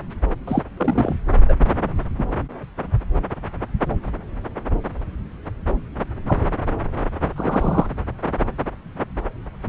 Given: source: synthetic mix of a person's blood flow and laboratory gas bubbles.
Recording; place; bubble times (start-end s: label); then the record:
Doppler ultrasound of blood flow; subclavian vein
0.47-0.63 s: bubbles
0.77-1.12 s: bubbles
1.48-1.53 s: bubbles
2.18-2.24 s: bubbles
6.28-6.50 s: bubbles
7.36-7.87 s: bubbles
From the record:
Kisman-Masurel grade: 122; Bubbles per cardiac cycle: 1 to 2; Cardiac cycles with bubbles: 10 to 50%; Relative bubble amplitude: moderate (0.250 to 0.450); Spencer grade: 2 (many but less than half of the cardiac periods contain bubble signals, singularly or in groups); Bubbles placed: anywhere in the cardiac cycle